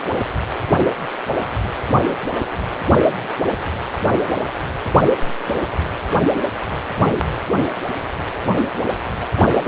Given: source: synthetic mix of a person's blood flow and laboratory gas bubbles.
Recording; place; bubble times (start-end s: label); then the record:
Doppler ultrasound of blood flow; precordium
9.37-9.45 s: bubbles
9.54-9.61 s: bubbles
From the record:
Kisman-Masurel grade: 122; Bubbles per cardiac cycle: 1 to 2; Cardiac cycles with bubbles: 10 to 50%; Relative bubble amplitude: moderate (0.250 to 0.450); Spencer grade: 2 (many but less than half of the cardiac periods contain bubble signals, singularly or in groups); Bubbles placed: anywhere in the cardiac cycle